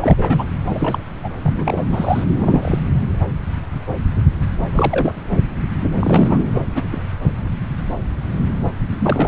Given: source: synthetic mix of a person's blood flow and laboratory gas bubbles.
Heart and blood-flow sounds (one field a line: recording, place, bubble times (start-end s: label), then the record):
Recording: Doppler ultrasound of blood flow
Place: subclavian vein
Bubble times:
0.01-0.45 s: bubbles
0.69-0.99 s: bubbles
1.24-1.28 s: bubbles
1.43-1.84 s: bubbles
1.90-2.24 s: bubbles
2.36-2.79 s: bubbles
4.72-5.13 s: bubbles
6.00-6.39 s: bubbles
6.54-6.62 s: bubbles
6.74-6.87 s: bubbles
6.91-7.02 s: bubbles
9.00-9.28 s: bubbles
From the record:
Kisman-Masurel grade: 232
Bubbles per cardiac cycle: several, 3 to 8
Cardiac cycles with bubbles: 50 to 99%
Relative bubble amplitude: moderate (0.250 to 0.450)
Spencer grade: 3 (all of the cardiac periods contain showers or single bubble signals, but not dominating or overriding the cardiac motion signals)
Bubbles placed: anywhere in the cardiac cycle